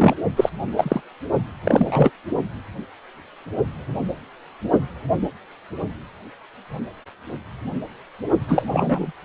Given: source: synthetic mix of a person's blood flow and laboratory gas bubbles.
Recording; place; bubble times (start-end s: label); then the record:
Doppler ultrasound of blood flow; precordium
0.00-0.14 s: bubbles
0.36-0.49 s: bubbles
0.77-1.01 s: bubbles
1.64-2.10 s: bubbles
8.48-8.64 s: bubbles
8.73-9.12 s: bubbles
From the record:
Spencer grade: 2 (many but less than half of the cardiac periods contain bubble signals, singularly or in groups); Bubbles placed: only in the low amplitude regions of the cardiac cycle